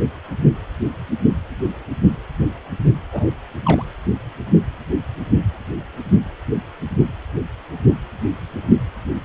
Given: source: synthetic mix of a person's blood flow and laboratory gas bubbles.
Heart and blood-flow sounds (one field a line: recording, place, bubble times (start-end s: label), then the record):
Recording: Doppler ultrasound of blood flow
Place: precordium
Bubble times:
3.12-3.29 s: bubbles
3.63-3.85 s: bubbles
From the record:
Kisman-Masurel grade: 212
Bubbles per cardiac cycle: several, 3 to 8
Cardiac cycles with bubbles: 1 to 10%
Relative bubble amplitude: moderate (0.250 to 0.450)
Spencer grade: 1 (occasional bubble signal discernible with the cardiac motion signal, with majority of cardiac periods free of bubbles)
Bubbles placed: anywhere in the cardiac cycle